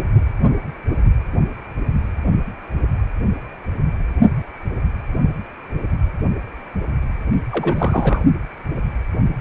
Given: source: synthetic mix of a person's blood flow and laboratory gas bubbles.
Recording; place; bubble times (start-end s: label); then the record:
Doppler ultrasound of blood flow; precordium
7.52-8.23 s: bubbles
From the record:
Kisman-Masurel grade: 212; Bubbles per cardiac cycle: several, 3 to 8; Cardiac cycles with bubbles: 1 to 10%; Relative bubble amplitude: moderate (0.250 to 0.450); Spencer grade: 1 (occasional bubble signal discernible with the cardiac motion signal, with majority of cardiac periods free of bubbles); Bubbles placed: only in the low amplitude regions of the cardiac cycle